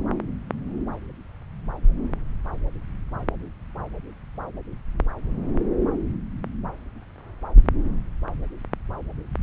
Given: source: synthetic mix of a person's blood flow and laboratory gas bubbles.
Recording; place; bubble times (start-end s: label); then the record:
Doppler ultrasound of blood flow; subclavian vein
no bubbles
From the record:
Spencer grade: 0 (complete lack of bubble signals)